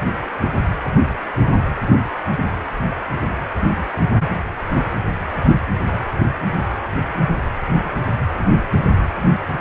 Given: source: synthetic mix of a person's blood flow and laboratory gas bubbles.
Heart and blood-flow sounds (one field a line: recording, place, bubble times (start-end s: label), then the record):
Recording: Doppler ultrasound of blood flow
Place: precordium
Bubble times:
9.33-9.38 s: bubbles
From the record:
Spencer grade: 1 (occasional bubble signal discernible with the cardiac motion signal, with majority of cardiac periods free of bubbles)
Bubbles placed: anywhere in the cardiac cycle